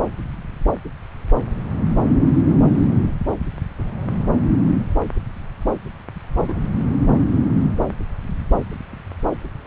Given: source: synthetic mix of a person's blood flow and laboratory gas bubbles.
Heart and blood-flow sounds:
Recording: Doppler ultrasound of blood flow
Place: subclavian vein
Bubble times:
6.48-6.54 s: bubbles
From the record:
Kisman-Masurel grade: 112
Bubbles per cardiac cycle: 1 to 2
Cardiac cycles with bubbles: 1 to 10%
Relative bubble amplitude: moderate (0.250 to 0.450)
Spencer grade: 1 (occasional bubble signal discernible with the cardiac motion signal, with majority of cardiac periods free of bubbles)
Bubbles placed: anywhere in the cardiac cycle

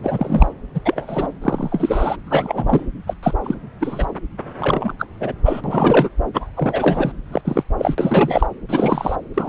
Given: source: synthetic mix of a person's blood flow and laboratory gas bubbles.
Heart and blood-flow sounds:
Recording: Doppler ultrasound of blood flow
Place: subclavian vein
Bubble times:
0.03-0.54 s: bubbles
0.74-0.80 s: bubbles
0.85-1.27 s: bubbles
1.42-2.17 s: bubbles
2.26-2.85 s: bubbles
3.07-3.15 s: bubbles
3.23-3.33 s: bubbles
3.44-3.54 s: bubbles
3.80-4.06 s: bubbles
4.59-4.93 s: bubbles
4.99-5.07 s: bubbles
5.20-5.33 s: bubbles
5.45-5.61 s: bubbles
5.64-6.09 s: bubbles
6.33-6.50 s: bubbles
6.56-7.12 s: bubbles
7.32-7.42 s: bubbles
7.45-7.64 s: bubbles
7.79-7.95 s: bubbles
7.98-8.46 s: bubbles
8.69-9.15 s: bubbles
9.34-9.49 s: bubbles
From the record:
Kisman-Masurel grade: 243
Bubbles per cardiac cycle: several, 3 to 8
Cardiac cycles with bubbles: 100%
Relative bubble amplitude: loud (0.450 to 0.775)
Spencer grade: 3 (all of the cardiac periods contain showers or single bubble signals, but not dominating or overriding the cardiac motion signals)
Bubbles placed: anywhere in the cardiac cycle

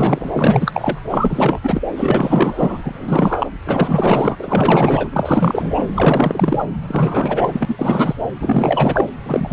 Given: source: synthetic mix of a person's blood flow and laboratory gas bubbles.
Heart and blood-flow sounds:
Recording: Doppler ultrasound of blood flow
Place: subclavian vein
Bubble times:
0.00-0.99 s: bubbles
1.08-1.59 s: bubbles
1.62-1.81 s: bubbles
1.96-2.82 s: bubbles
2.85-3.51 s: bubbles
3.65-4.36 s: bubbles
4.38-5.08 s: bubbles
5.12-5.87 s: bubbles
5.93-6.66 s: bubbles
6.88-7.66 s: bubbles
7.68-7.75 s: bubbles
7.78-8.16 s: bubbles
8.41-9.09 s: bubbles
9.23-9.53 s: bubbles
From the record:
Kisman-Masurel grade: 444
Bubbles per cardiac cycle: continuous sound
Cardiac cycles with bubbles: 100%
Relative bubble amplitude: maximal (0.775 to 0.999)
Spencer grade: 4 (maximum detectable bubble signal sounding continuously throughout systole and diastole of every cardiac period, and overriding the amplitude of the normal cardiac signals)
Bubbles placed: anywhere in the cardiac cycle

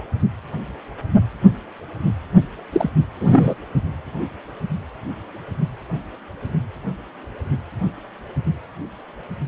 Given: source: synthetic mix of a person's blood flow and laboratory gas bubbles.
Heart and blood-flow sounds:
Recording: Doppler ultrasound of blood flow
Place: precordium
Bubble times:
2.72-2.89 s: bubbles
3.20-3.55 s: bubbles
From the record:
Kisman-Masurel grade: 223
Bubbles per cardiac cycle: several, 3 to 8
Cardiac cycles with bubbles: 10 to 50%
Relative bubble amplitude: loud (0.450 to 0.775)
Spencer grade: 2 (many but less than half of the cardiac periods contain bubble signals, singularly or in groups)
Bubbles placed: only in the low amplitude regions of the cardiac cycle

